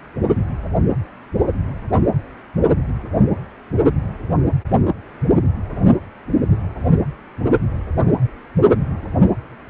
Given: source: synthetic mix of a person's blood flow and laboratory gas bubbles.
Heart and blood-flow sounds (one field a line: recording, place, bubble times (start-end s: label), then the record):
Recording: Doppler ultrasound of blood flow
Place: precordium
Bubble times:
no bubbles
From the record:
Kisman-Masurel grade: 000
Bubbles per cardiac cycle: 0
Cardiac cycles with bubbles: 0%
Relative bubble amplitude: no bubbles discernible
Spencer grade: 0 (complete lack of bubble signals)